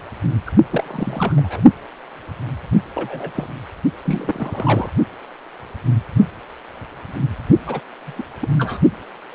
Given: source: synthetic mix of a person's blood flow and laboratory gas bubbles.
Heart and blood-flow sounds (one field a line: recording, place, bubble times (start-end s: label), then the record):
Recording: Doppler ultrasound of blood flow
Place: precordium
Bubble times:
0.46-0.52 s: bubbles
0.70-1.35 s: bubbles
1.37-1.61 s: bubbles
2.94-3.31 s: bubbles
3.35-3.48 s: bubbles
4.04-4.89 s: bubbles
7.67-7.80 s: bubbles
8.06-8.27 s: bubbles
8.42-8.48 s: bubbles
8.58-8.79 s: bubbles
From the record:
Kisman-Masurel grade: 221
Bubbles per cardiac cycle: several, 3 to 8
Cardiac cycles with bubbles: 10 to 50%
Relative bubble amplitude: barely perceptible (0.100 to 0.250)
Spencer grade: 2 (many but less than half of the cardiac periods contain bubble signals, singularly or in groups)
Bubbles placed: only in the low amplitude regions of the cardiac cycle